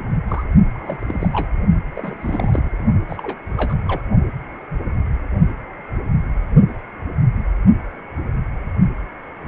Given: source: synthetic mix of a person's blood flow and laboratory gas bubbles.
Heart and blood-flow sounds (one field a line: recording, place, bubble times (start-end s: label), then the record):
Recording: Doppler ultrasound of blood flow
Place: precordium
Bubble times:
0.28-0.44 s: bubbles
0.73-0.99 s: bubbles
1.01-1.48 s: bubbles
1.96-2.83 s: bubbles
3.08-3.37 s: bubbles
3.57-3.75 s: bubbles
3.88-4.01 s: bubbles
From the record:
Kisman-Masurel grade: 221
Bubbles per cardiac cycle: several, 3 to 8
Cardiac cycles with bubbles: 10 to 50%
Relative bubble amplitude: barely perceptible (0.100 to 0.250)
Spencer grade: 2 (many but less than half of the cardiac periods contain bubble signals, singularly or in groups)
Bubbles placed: only in the low amplitude regions of the cardiac cycle